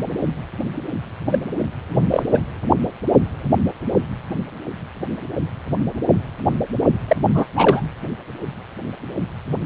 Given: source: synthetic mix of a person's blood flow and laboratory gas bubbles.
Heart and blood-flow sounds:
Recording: Doppler ultrasound of blood flow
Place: precordium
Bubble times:
1.31-1.39 s: bubbles
1.92-2.08 s: bubbles
2.11-2.23 s: bubbles
2.33-2.42 s: bubbles
7.08-7.17 s: bubbles
7.33-7.46 s: bubbles
7.56-7.82 s: bubbles
From the record:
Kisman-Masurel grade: 223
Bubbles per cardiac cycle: several, 3 to 8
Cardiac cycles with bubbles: 10 to 50%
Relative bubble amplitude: loud (0.450 to 0.775)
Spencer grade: 2 (many but less than half of the cardiac periods contain bubble signals, singularly or in groups)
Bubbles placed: anywhere in the cardiac cycle

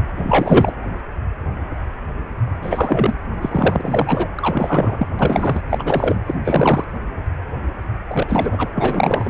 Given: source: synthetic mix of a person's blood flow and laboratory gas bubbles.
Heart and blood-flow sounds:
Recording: Doppler ultrasound of blood flow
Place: precordium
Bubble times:
0.16-0.73 s: bubbles
2.62-3.15 s: bubbles
3.42-4.28 s: bubbles
4.35-5.07 s: bubbles
5.19-5.61 s: bubbles
5.69-6.16 s: bubbles
6.26-6.35 s: bubbles
6.44-6.84 s: bubbles
8.10-8.70 s: bubbles
8.74-9.30 s: bubbles
From the record:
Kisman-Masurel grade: 333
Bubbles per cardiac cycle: rolling drumbeat, 9 or more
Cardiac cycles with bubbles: 50 to 99%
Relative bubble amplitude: loud (0.450 to 0.775)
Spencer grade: 3 (all of the cardiac periods contain showers or single bubble signals, but not dominating or overriding the cardiac motion signals)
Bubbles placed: anywhere in the cardiac cycle

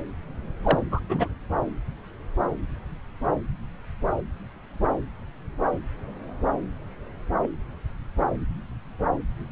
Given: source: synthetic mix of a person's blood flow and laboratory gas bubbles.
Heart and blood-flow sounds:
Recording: Doppler ultrasound of blood flow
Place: subclavian vein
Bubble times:
0.63-0.79 s: bubbles
0.92-1.00 s: bubbles
1.09-1.28 s: bubbles
7.42-7.47 s: bubbles
From the record:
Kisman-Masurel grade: 122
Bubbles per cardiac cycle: 1 to 2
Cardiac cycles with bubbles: 10 to 50%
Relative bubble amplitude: moderate (0.250 to 0.450)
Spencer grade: 2 (many but less than half of the cardiac periods contain bubble signals, singularly or in groups)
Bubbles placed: anywhere in the cardiac cycle

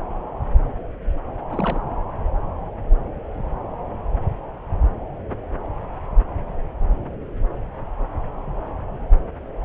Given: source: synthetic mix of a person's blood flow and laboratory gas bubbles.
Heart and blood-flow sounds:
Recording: Doppler ultrasound of blood flow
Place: subclavian vein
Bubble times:
1.51-1.80 s: bubbles
From the record:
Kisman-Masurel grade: 211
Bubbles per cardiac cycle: several, 3 to 8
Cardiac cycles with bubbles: 1 to 10%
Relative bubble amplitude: barely perceptible (0.100 to 0.250)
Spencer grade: 1 (occasional bubble signal discernible with the cardiac motion signal, with majority of cardiac periods free of bubbles)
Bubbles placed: anywhere in the cardiac cycle

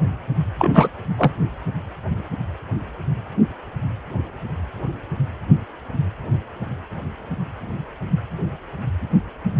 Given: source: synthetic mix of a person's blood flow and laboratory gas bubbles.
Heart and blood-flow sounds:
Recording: Doppler ultrasound of blood flow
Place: precordium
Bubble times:
0.59-0.90 s: bubbles
1.17-1.31 s: bubbles
From the record:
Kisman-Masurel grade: 213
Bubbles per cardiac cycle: several, 3 to 8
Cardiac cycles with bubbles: 1 to 10%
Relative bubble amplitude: loud (0.450 to 0.775)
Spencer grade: 1 (occasional bubble signal discernible with the cardiac motion signal, with majority of cardiac periods free of bubbles)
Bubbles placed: anywhere in the cardiac cycle

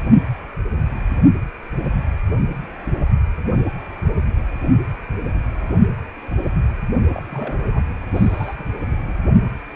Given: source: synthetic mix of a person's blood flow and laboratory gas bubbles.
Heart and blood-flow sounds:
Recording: Doppler ultrasound of blood flow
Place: precordium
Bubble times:
7.13-7.23 s: bubbles
7.30-7.57 s: bubbles
7.73-7.84 s: bubbles
8.14-8.55 s: bubbles
8.58-8.63 s: bubbles
8.92-9.15 s: bubbles
From the record:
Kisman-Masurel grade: 211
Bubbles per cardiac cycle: several, 3 to 8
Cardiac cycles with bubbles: 1 to 10%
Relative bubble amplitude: barely perceptible (0.100 to 0.250)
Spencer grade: 1 (occasional bubble signal discernible with the cardiac motion signal, with majority of cardiac periods free of bubbles)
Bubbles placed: only in the low amplitude regions of the cardiac cycle

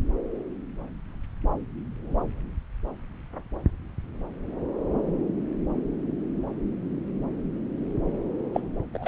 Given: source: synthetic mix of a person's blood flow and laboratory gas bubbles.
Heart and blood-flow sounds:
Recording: Doppler ultrasound of blood flow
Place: subclavian vein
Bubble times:
8.54-8.61 s: bubbles
8.93-9.08 s: bubbles
From the record:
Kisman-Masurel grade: 222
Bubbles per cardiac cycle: several, 3 to 8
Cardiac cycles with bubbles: 10 to 50%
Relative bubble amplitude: moderate (0.250 to 0.450)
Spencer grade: 2 (many but less than half of the cardiac periods contain bubble signals, singularly or in groups)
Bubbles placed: anywhere in the cardiac cycle

